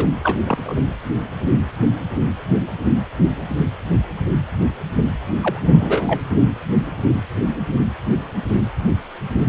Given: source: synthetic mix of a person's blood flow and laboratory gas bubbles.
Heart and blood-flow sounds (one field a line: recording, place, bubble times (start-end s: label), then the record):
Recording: Doppler ultrasound of blood flow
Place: precordium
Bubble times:
0.00-0.09 s: bubbles
0.23-0.39 s: bubbles
0.45-0.74 s: bubbles
5.42-5.59 s: bubbles
5.66-6.21 s: bubbles
From the record:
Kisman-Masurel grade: 222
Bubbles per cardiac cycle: several, 3 to 8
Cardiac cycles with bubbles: 10 to 50%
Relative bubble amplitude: moderate (0.250 to 0.450)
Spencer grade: 2 (many but less than half of the cardiac periods contain bubble signals, singularly or in groups)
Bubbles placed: anywhere in the cardiac cycle